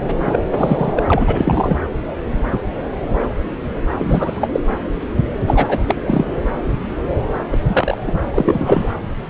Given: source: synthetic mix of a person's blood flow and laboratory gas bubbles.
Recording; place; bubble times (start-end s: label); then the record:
Doppler ultrasound of blood flow; subclavian vein
0.25-0.40 s: bubbles
0.55-1.04 s: bubbles
1.10-1.78 s: bubbles
3.98-4.50 s: bubbles
4.52-4.60 s: bubbles
5.46-5.84 s: bubbles
5.88-5.96 s: bubbles
6.05-6.25 s: bubbles
7.51-7.58 s: bubbles
7.67-7.97 s: bubbles
8.07-8.12 s: bubbles
8.34-8.95 s: bubbles
From the record:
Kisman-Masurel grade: 233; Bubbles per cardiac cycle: several, 3 to 8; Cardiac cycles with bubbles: 50 to 99%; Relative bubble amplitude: loud (0.450 to 0.775); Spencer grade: 3 (all of the cardiac periods contain showers or single bubble signals, but not dominating or overriding the cardiac motion signals); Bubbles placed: anywhere in the cardiac cycle